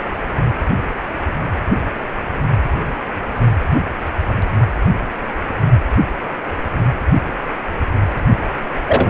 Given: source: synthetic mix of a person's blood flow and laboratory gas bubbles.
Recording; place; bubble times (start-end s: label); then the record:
Doppler ultrasound of blood flow; precordium
8.87-9.10 s: bubbles
From the record:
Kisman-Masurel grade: 123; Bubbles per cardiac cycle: 1 to 2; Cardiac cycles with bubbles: 10 to 50%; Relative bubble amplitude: loud (0.450 to 0.775); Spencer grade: 2 (many but less than half of the cardiac periods contain bubble signals, singularly or in groups); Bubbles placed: anywhere in the cardiac cycle